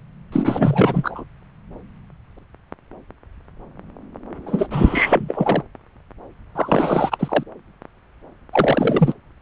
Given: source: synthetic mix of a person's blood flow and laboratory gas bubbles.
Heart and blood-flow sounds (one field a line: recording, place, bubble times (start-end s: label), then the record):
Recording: Doppler ultrasound of blood flow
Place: subclavian vein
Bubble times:
0.32-1.24 s: bubbles
4.46-4.68 s: bubbles
4.71-5.62 s: bubbles
6.55-7.44 s: bubbles
8.52-9.13 s: bubbles
From the record:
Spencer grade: 3 (all of the cardiac periods contain showers or single bubble signals, but not dominating or overriding the cardiac motion signals)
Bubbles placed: anywhere in the cardiac cycle